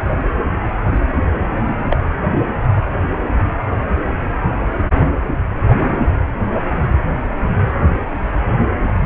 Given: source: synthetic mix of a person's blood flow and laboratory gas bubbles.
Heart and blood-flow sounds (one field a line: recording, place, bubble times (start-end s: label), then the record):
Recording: Doppler ultrasound of blood flow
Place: precordium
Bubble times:
1.90-1.97 s: bubbles
2.31-2.40 s: bubbles
From the record:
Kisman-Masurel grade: 113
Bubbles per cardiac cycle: 1 to 2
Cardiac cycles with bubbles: 1 to 10%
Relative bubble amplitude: loud (0.450 to 0.775)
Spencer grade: 1 (occasional bubble signal discernible with the cardiac motion signal, with majority of cardiac periods free of bubbles)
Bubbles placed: anywhere in the cardiac cycle